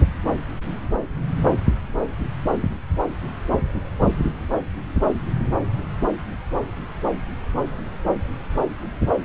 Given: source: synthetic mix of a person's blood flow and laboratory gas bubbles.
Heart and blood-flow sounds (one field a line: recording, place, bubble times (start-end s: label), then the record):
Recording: Doppler ultrasound of blood flow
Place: subclavian vein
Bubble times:
no bubbles
From the record:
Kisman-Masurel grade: 000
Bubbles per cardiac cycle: 0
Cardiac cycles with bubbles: 0%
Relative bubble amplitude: no bubbles discernible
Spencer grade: 0 (complete lack of bubble signals)